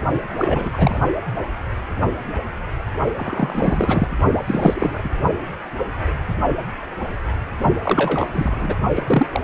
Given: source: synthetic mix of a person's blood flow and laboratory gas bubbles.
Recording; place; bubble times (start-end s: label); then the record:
Doppler ultrasound of blood flow; precordium
0.38-1.01 s: bubbles
3.16-4.08 s: bubbles
4.46-5.10 s: bubbles
7.83-8.28 s: bubbles
8.32-8.76 s: bubbles
8.96-9.03 s: bubbles
9.06-9.27 s: bubbles
9.31-9.40 s: bubbles
From the record:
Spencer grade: 3 (all of the cardiac periods contain showers or single bubble signals, but not dominating or overriding the cardiac motion signals); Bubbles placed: only in the low amplitude regions of the cardiac cycle